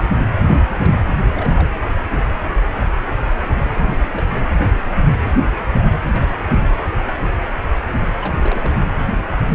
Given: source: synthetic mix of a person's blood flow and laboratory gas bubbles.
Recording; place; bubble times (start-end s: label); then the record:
Doppler ultrasound of blood flow; precordium
0.35-0.64 s: bubbles
0.69-0.98 s: bubbles
1.19-1.53 s: bubbles
1.56-1.72 s: bubbles
3.64-3.96 s: bubbles
4.03-4.27 s: bubbles
4.41-4.46 s: bubbles
6.13-6.35 s: bubbles
6.50-6.68 s: bubbles
8.21-8.76 s: bubbles
From the record:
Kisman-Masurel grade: 221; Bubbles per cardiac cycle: several, 3 to 8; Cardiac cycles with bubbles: 10 to 50%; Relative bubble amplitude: barely perceptible (0.100 to 0.250); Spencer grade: 2 (many but less than half of the cardiac periods contain bubble signals, singularly or in groups); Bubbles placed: anywhere in the cardiac cycle